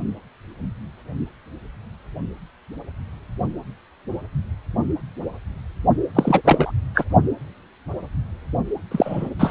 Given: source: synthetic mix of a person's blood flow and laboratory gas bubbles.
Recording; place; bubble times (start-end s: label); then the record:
Doppler ultrasound of blood flow; precordium
6.15-6.42 s: bubbles
6.45-6.71 s: bubbles
6.95-7.04 s: bubbles
8.91-9.29 s: bubbles
9.39-9.51 s: bubbles
From the record:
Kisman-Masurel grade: 223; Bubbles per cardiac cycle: several, 3 to 8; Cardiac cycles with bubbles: 10 to 50%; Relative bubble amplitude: loud (0.450 to 0.775); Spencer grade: 2 (many but less than half of the cardiac periods contain bubble signals, singularly or in groups); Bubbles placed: only in the low amplitude regions of the cardiac cycle